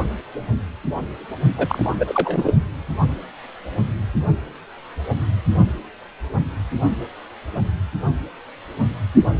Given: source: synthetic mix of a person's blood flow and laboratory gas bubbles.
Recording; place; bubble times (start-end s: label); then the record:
Doppler ultrasound of blood flow; precordium
1.57-1.91 s: bubbles
1.99-2.56 s: bubbles
From the record:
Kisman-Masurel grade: 213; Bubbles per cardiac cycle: several, 3 to 8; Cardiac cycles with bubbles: 1 to 10%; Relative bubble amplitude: loud (0.450 to 0.775); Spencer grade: 1 (occasional bubble signal discernible with the cardiac motion signal, with majority of cardiac periods free of bubbles); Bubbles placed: only in the low amplitude regions of the cardiac cycle